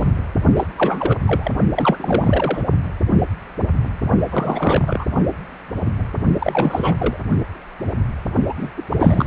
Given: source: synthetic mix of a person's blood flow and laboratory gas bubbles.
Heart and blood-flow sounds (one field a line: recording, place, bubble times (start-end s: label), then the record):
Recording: Doppler ultrasound of blood flow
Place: precordium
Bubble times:
0.00-0.08 s: bubbles
0.55-0.67 s: bubbles
0.75-1.17 s: bubbles
1.25-1.52 s: bubbles
1.76-1.96 s: bubbles
1.99-2.62 s: bubbles
4.31-5.04 s: bubbles
6.38-7.17 s: bubbles
8.49-8.53 s: bubbles
8.57-8.69 s: bubbles
8.77-8.83 s: bubbles
8.90-9.27 s: bubbles
From the record:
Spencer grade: 3 (all of the cardiac periods contain showers or single bubble signals, but not dominating or overriding the cardiac motion signals)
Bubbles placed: only in the low amplitude regions of the cardiac cycle